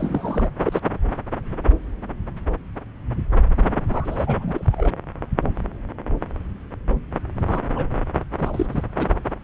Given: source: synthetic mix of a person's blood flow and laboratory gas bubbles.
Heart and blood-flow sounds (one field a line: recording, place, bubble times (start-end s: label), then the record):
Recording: Doppler ultrasound of blood flow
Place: subclavian vein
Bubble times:
0.00-0.48 s: bubbles
0.63-0.80 s: bubbles
3.89-4.96 s: bubbles
7.47-7.59 s: bubbles
7.75-7.87 s: bubbles
8.38-8.66 s: bubbles
8.71-8.84 s: bubbles
8.98-9.07 s: bubbles
From the record:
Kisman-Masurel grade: 222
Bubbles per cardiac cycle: several, 3 to 8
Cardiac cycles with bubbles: 10 to 50%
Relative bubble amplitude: moderate (0.250 to 0.450)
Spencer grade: 2 (many but less than half of the cardiac periods contain bubble signals, singularly or in groups)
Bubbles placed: anywhere in the cardiac cycle